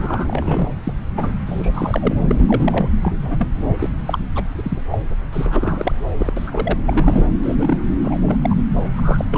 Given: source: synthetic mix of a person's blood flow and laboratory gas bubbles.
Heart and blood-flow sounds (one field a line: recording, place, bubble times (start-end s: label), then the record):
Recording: Doppler ultrasound of blood flow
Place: subclavian vein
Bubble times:
0.00-0.68 s: bubbles
0.83-0.94 s: bubbles
1.17-1.32 s: bubbles
1.46-2.14 s: bubbles
2.28-2.91 s: bubbles
3.03-3.48 s: bubbles
3.79-3.89 s: bubbles
4.05-4.18 s: bubbles
4.35-4.40 s: bubbles
4.58-4.78 s: bubbles
4.90-4.98 s: bubbles
5.33-6.01 s: bubbles
6.17-6.33 s: bubbles
6.37-6.78 s: bubbles
6.87-7.27 s: bubbles
7.42-7.78 s: bubbles
8.02-8.17 s: bubbles
8.21-8.37 s: bubbles
8.41-8.55 s: bubbles
8.96-9.25 s: bubbles
9.31-9.37 s: bubbles
From the record:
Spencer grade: 3 (all of the cardiac periods contain showers or single bubble signals, but not dominating or overriding the cardiac motion signals)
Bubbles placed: anywhere in the cardiac cycle